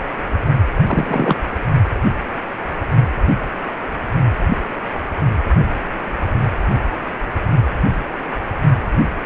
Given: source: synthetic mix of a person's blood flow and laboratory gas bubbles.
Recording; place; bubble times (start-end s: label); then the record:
Doppler ultrasound of blood flow; precordium
0.86-1.36 s: bubbles
From the record:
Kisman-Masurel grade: 113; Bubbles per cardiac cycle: 1 to 2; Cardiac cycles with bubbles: 1 to 10%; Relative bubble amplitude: loud (0.450 to 0.775); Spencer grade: 1 (occasional bubble signal discernible with the cardiac motion signal, with majority of cardiac periods free of bubbles); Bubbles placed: only in the low amplitude regions of the cardiac cycle